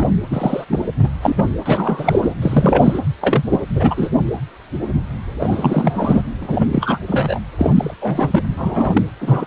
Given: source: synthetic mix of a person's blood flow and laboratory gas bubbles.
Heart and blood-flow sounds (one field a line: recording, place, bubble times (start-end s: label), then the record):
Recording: Doppler ultrasound of blood flow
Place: precordium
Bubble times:
0.00-0.06 s: bubbles
0.30-0.64 s: bubbles
0.70-0.84 s: bubbles
0.98-1.10 s: bubbles
1.21-1.46 s: bubbles
1.65-2.34 s: bubbles
2.42-3.00 s: bubbles
3.21-3.43 s: bubbles
3.50-3.60 s: bubbles
3.75-4.09 s: bubbles
5.40-6.22 s: bubbles
6.41-6.69 s: bubbles
6.71-6.99 s: bubbles
7.08-7.39 s: bubbles
7.58-7.94 s: bubbles
8.01-8.43 s: bubbles
8.57-9.02 s: bubbles
9.20-9.46 s: bubbles
From the record:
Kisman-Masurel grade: 233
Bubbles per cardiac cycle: several, 3 to 8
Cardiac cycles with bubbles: 50 to 99%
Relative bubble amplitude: loud (0.450 to 0.775)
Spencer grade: 3 (all of the cardiac periods contain showers or single bubble signals, but not dominating or overriding the cardiac motion signals)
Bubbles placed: anywhere in the cardiac cycle